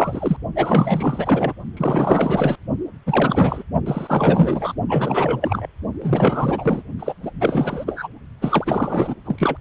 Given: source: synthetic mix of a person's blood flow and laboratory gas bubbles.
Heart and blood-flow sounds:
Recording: Doppler ultrasound of blood flow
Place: precordium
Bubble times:
0.00-0.36 s: bubbles
0.55-1.53 s: bubbles
1.76-2.56 s: bubbles
3.06-3.63 s: bubbles
3.86-4.74 s: bubbles
4.89-5.66 s: bubbles
6.02-6.83 s: bubbles
6.99-7.14 s: bubbles
7.22-7.31 s: bubbles
7.40-8.07 s: bubbles
8.41-9.15 s: bubbles
9.25-9.57 s: bubbles
From the record:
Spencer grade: 4 (maximum detectable bubble signal sounding continuously throughout systole and diastole of every cardiac period, and overriding the amplitude of the normal cardiac signals)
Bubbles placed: only in the low amplitude regions of the cardiac cycle

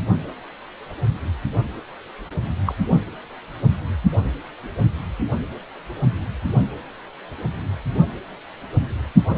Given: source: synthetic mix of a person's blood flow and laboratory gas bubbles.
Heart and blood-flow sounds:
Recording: Doppler ultrasound of blood flow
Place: precordium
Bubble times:
2.66-2.76 s: bubbles
9.28-9.38 s: bubbles
From the record:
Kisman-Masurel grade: 122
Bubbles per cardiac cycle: 1 to 2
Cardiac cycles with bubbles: 10 to 50%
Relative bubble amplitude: moderate (0.250 to 0.450)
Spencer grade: 2 (many but less than half of the cardiac periods contain bubble signals, singularly or in groups)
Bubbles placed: only in the low amplitude regions of the cardiac cycle

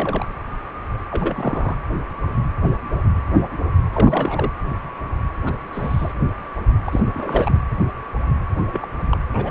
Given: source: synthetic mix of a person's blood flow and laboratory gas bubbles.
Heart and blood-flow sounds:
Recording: Doppler ultrasound of blood flow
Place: precordium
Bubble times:
0.00-0.26 s: bubbles
1.10-1.77 s: bubbles
3.93-4.52 s: bubbles
5.43-5.53 s: bubbles
5.72-6.13 s: bubbles
6.85-7.62 s: bubbles
8.67-8.87 s: bubbles
8.98-9.04 s: bubbles
9.09-9.19 s: bubbles
9.31-9.51 s: bubbles
From the record:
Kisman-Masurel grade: 232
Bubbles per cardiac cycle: several, 3 to 8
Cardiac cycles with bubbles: 50 to 99%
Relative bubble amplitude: moderate (0.250 to 0.450)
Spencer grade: 3 (all of the cardiac periods contain showers or single bubble signals, but not dominating or overriding the cardiac motion signals)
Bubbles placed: anywhere in the cardiac cycle

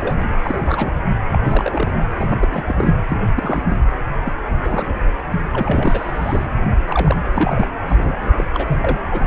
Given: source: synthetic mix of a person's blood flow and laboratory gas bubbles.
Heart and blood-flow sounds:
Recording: Doppler ultrasound of blood flow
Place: precordium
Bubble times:
0.00-0.27 s: bubbles
0.38-0.94 s: bubbles
1.08-1.16 s: bubbles
1.32-1.41 s: bubbles
1.45-1.97 s: bubbles
2.17-2.48 s: bubbles
2.51-2.93 s: bubbles
3.08-3.17 s: bubbles
3.36-3.62 s: bubbles
3.69-3.79 s: bubbles
4.24-4.33 s: bubbles
4.58-5.00 s: bubbles
5.53-6.46 s: bubbles
6.87-7.17 s: bubbles
7.35-7.70 s: bubbles
7.89-8.13 s: bubbles
8.21-8.44 s: bubbles
8.53-8.78 s: bubbles
8.81-9.01 s: bubbles
9.11-9.27 s: bubbles
From the record:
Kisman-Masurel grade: 242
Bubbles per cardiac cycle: several, 3 to 8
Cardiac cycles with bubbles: 100%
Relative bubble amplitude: moderate (0.250 to 0.450)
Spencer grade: 3 (all of the cardiac periods contain showers or single bubble signals, but not dominating or overriding the cardiac motion signals)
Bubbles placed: anywhere in the cardiac cycle

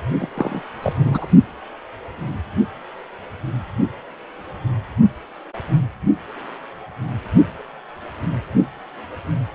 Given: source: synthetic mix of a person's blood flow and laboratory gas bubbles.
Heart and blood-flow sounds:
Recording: Doppler ultrasound of blood flow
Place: precordium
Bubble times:
0.20-0.27 s: bubbles
0.35-0.62 s: bubbles
0.82-1.26 s: bubbles
From the record:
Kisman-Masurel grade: 212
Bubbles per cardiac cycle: several, 3 to 8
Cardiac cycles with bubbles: 1 to 10%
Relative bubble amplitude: moderate (0.250 to 0.450)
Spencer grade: 1 (occasional bubble signal discernible with the cardiac motion signal, with majority of cardiac periods free of bubbles)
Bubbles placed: only in the low amplitude regions of the cardiac cycle

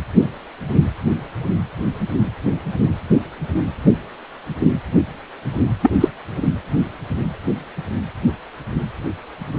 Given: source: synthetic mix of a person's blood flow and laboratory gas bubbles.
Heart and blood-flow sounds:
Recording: Doppler ultrasound of blood flow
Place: precordium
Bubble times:
5.83-5.90 s: bubbles
6.00-6.08 s: bubbles
From the record:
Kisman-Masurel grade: 113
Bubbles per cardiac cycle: 1 to 2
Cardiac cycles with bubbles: 1 to 10%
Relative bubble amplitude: loud (0.450 to 0.775)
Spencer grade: 1 (occasional bubble signal discernible with the cardiac motion signal, with majority of cardiac periods free of bubbles)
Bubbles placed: anywhere in the cardiac cycle

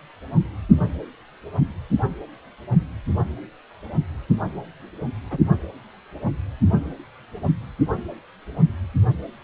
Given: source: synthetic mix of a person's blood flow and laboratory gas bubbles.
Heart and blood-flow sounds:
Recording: Doppler ultrasound of blood flow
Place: precordium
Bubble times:
5.30-5.38 s: bubbles
From the record:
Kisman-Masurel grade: 121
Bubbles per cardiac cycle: 1 to 2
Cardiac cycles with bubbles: 10 to 50%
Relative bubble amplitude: barely perceptible (0.100 to 0.250)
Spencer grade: 2 (many but less than half of the cardiac periods contain bubble signals, singularly or in groups)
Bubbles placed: only in the low amplitude regions of the cardiac cycle

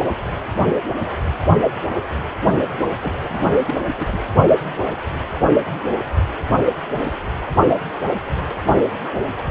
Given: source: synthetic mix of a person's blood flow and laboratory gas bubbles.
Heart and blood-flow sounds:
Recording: Doppler ultrasound of blood flow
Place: precordium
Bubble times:
3.01-3.12 s: bubbles
3.18-3.51 s: bubbles
3.67-3.75 s: bubbles
3.98-4.20 s: bubbles
From the record:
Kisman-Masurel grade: 211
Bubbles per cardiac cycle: several, 3 to 8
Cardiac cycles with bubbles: 1 to 10%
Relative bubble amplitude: barely perceptible (0.100 to 0.250)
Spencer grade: 1 (occasional bubble signal discernible with the cardiac motion signal, with majority of cardiac periods free of bubbles)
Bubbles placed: only in the low amplitude regions of the cardiac cycle

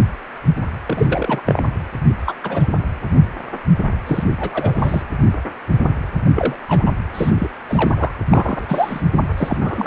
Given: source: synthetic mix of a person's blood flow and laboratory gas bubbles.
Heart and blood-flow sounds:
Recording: Doppler ultrasound of blood flow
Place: precordium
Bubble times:
0.86-1.41 s: bubbles
1.46-1.61 s: bubbles
2.25-2.34 s: bubbles
2.43-2.68 s: bubbles
4.06-4.24 s: bubbles
4.39-5.02 s: bubbles
6.34-6.56 s: bubbles
6.68-6.90 s: bubbles
7.14-7.30 s: bubbles
7.34-7.48 s: bubbles
7.68-8.12 s: bubbles
8.31-8.65 s: bubbles
8.68-9.03 s: bubbles
9.37-9.57 s: bubbles
9.61-9.87 s: bubbles
From the record:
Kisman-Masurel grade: 232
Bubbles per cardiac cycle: several, 3 to 8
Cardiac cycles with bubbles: 50 to 99%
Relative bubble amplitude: moderate (0.250 to 0.450)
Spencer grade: 3 (all of the cardiac periods contain showers or single bubble signals, but not dominating or overriding the cardiac motion signals)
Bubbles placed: anywhere in the cardiac cycle

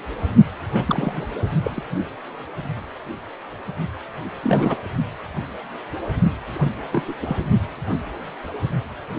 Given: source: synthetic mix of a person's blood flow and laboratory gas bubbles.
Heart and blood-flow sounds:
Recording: Doppler ultrasound of blood flow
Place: precordium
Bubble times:
0.73-1.27 s: bubbles
1.64-1.82 s: bubbles
4.43-4.77 s: bubbles
6.52-6.72 s: bubbles
6.92-7.03 s: bubbles
7.07-7.14 s: bubbles
7.22-7.38 s: bubbles
From the record:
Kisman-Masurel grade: 222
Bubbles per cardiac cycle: several, 3 to 8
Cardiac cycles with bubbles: 10 to 50%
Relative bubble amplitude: moderate (0.250 to 0.450)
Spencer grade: 2 (many but less than half of the cardiac periods contain bubble signals, singularly or in groups)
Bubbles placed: only in the low amplitude regions of the cardiac cycle

